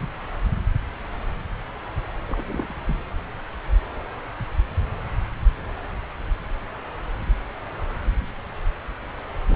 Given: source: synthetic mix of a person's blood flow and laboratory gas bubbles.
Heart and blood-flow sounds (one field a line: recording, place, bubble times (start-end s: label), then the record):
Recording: Doppler ultrasound of blood flow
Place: subclavian vein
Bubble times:
0.00-0.08 s: bubbles
2.28-2.81 s: bubbles
2.89-2.96 s: bubbles
9.48-9.56 s: bubbles
From the record:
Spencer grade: 2 (many but less than half of the cardiac periods contain bubble signals, singularly or in groups)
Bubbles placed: anywhere in the cardiac cycle